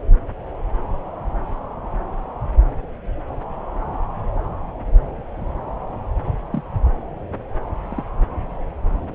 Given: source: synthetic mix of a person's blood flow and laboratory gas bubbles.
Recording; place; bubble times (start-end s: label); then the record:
Doppler ultrasound of blood flow; subclavian vein
6.52-6.62 s: bubbles
7.90-8.04 s: bubbles
From the record:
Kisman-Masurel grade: 111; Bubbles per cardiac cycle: 1 to 2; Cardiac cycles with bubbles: 1 to 10%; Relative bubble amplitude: barely perceptible (0.100 to 0.250); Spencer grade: 1 (occasional bubble signal discernible with the cardiac motion signal, with majority of cardiac periods free of bubbles); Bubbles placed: anywhere in the cardiac cycle